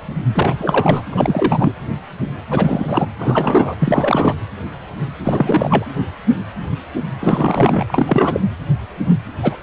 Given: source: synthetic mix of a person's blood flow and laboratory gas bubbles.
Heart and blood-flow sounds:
Doppler ultrasound of blood flow; precordium
0.34-0.54 s: bubbles
0.58-1.02 s: bubbles
1.12-1.73 s: bubbles
2.50-3.05 s: bubbles
3.19-3.75 s: bubbles
3.79-4.35 s: bubbles
5.23-5.85 s: bubbles
7.20-8.40 s: bubbles
9.42-9.55 s: bubbles
From the record:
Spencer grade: 3 (all of the cardiac periods contain showers or single bubble signals, but not dominating or overriding the cardiac motion signals); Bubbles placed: anywhere in the cardiac cycle

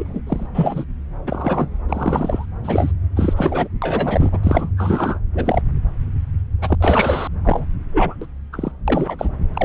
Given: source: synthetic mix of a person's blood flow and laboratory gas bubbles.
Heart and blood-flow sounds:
Doppler ultrasound of blood flow; subclavian vein
0.00-0.21 s: bubbles
0.27-0.46 s: bubbles
0.54-0.84 s: bubbles
1.26-1.70 s: bubbles
1.89-2.46 s: bubbles
2.64-2.92 s: bubbles
3.16-3.68 s: bubbles
3.82-4.29 s: bubbles
4.32-4.38 s: bubbles
4.43-4.73 s: bubbles
4.77-5.19 s: bubbles
5.34-5.62 s: bubbles
6.62-6.75 s: bubbles
6.80-7.28 s: bubbles
7.45-7.67 s: bubbles
7.93-8.15 s: bubbles
8.21-8.26 s: bubbles
8.53-8.71 s: bubbles
8.88-9.29 s: bubbles
9.54-9.65 s: bubbles
From the record:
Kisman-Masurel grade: 242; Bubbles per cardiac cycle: several, 3 to 8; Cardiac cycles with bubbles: 100%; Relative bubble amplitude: moderate (0.250 to 0.450); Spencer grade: 3 (all of the cardiac periods contain showers or single bubble signals, but not dominating or overriding the cardiac motion signals); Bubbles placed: anywhere in the cardiac cycle

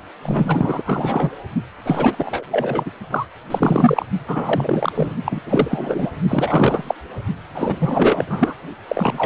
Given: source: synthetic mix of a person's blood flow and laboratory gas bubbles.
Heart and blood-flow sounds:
Doppler ultrasound of blood flow; precordium
0.22-1.32 s: bubbles
1.83-2.43 s: bubbles
2.51-2.90 s: bubbles
3.10-3.26 s: bubbles
3.50-4.05 s: bubbles
4.28-4.92 s: bubbles
4.95-5.13 s: bubbles
5.25-5.41 s: bubbles
5.46-6.11 s: bubbles
6.28-6.95 s: bubbles
7.54-8.24 s: bubbles
8.27-8.54 s: bubbles
8.88-9.26 s: bubbles
From the record:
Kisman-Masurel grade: 343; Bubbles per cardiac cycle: rolling drumbeat, 9 or more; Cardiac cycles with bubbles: 100%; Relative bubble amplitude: loud (0.450 to 0.775); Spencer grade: 3 (all of the cardiac periods contain showers or single bubble signals, but not dominating or overriding the cardiac motion signals); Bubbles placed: only in the low amplitude regions of the cardiac cycle

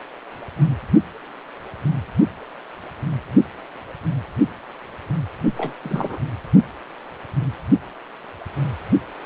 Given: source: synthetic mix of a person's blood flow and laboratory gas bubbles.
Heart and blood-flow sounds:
Doppler ultrasound of blood flow; precordium
5.57-5.73 s: bubbles
5.83-6.18 s: bubbles
From the record:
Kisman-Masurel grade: 211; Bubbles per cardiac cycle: several, 3 to 8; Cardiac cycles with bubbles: 1 to 10%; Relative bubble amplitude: barely perceptible (0.100 to 0.250); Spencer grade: 1 (occasional bubble signal discernible with the cardiac motion signal, with majority of cardiac periods free of bubbles); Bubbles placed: only in the low amplitude regions of the cardiac cycle

